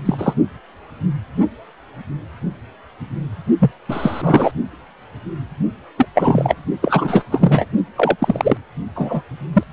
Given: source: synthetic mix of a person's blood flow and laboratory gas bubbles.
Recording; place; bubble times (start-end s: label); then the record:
Doppler ultrasound of blood flow; precordium
0.05-0.35 s: bubbles
3.59-3.71 s: bubbles
3.88-4.52 s: bubbles
5.98-6.07 s: bubbles
6.15-6.56 s: bubbles
6.82-7.24 s: bubbles
7.31-7.66 s: bubbles
7.97-8.16 s: bubbles
8.19-8.57 s: bubbles
8.96-9.22 s: bubbles
9.53-9.63 s: bubbles
From the record:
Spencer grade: 2 (many but less than half of the cardiac periods contain bubble signals, singularly or in groups); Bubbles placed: only in the low amplitude regions of the cardiac cycle